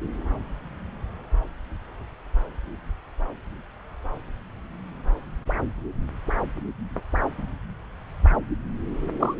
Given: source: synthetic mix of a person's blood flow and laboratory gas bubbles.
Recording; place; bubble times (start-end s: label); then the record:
Doppler ultrasound of blood flow; subclavian vein
9.19-9.35 s: bubbles
From the record:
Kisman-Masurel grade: 212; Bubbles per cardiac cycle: several, 3 to 8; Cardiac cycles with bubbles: 1 to 10%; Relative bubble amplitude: moderate (0.250 to 0.450); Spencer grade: 1 (occasional bubble signal discernible with the cardiac motion signal, with majority of cardiac periods free of bubbles); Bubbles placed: anywhere in the cardiac cycle